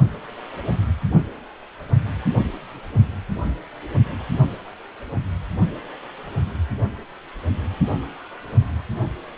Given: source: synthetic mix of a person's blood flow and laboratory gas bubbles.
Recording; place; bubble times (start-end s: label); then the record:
Doppler ultrasound of blood flow; precordium
no bubbles
From the record:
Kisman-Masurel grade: 000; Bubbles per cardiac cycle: 0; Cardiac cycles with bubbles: 0%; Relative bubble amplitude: no bubbles discernible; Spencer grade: 0 (complete lack of bubble signals)